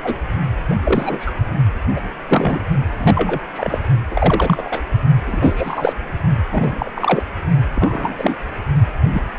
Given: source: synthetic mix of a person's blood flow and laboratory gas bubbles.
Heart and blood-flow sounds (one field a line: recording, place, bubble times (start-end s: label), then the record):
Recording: Doppler ultrasound of blood flow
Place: precordium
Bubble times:
0.03-0.16 s: bubbles
0.70-0.76 s: bubbles
0.84-1.32 s: bubbles
1.96-2.00 s: bubbles
2.28-2.64 s: bubbles
2.97-3.40 s: bubbles
3.54-3.78 s: bubbles
4.10-4.83 s: bubbles
5.27-5.93 s: bubbles
6.50-6.91 s: bubbles
6.95-7.22 s: bubbles
7.75-8.35 s: bubbles
9.13-9.22 s: bubbles
From the record:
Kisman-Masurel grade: 242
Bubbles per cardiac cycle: several, 3 to 8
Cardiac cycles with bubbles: 100%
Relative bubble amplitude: moderate (0.250 to 0.450)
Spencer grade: 3 (all of the cardiac periods contain showers or single bubble signals, but not dominating or overriding the cardiac motion signals)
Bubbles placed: only in the low amplitude regions of the cardiac cycle